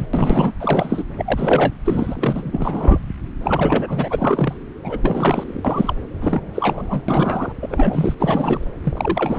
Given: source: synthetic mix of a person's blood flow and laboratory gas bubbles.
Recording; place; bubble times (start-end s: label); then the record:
Doppler ultrasound of blood flow; subclavian vein
0.00-0.06 s: bubbles
0.13-0.52 s: bubbles
0.59-1.03 s: bubbles
1.17-1.76 s: bubbles
1.85-2.99 s: bubbles
3.42-4.58 s: bubbles
4.83-5.96 s: bubbles
6.21-6.41 s: bubbles
6.54-7.02 s: bubbles
7.08-7.53 s: bubbles
7.61-8.15 s: bubbles
8.20-8.68 s: bubbles
8.83-9.39 s: bubbles
From the record:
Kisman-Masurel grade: 342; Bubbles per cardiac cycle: rolling drumbeat, 9 or more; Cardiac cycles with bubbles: 100%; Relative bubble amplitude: moderate (0.250 to 0.450); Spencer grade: 3 (all of the cardiac periods contain showers or single bubble signals, but not dominating or overriding the cardiac motion signals); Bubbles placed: anywhere in the cardiac cycle